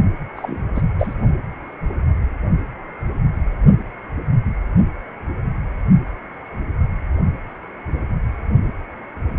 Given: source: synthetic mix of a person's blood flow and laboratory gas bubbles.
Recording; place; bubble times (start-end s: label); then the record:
Doppler ultrasound of blood flow; precordium
0.35-0.65 s: bubbles
0.75-0.82 s: bubbles
0.98-1.14 s: bubbles
From the record:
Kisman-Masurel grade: 222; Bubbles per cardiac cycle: several, 3 to 8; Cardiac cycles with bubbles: 10 to 50%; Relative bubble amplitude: moderate (0.250 to 0.450); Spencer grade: 2 (many but less than half of the cardiac periods contain bubble signals, singularly or in groups); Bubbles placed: only in the low amplitude regions of the cardiac cycle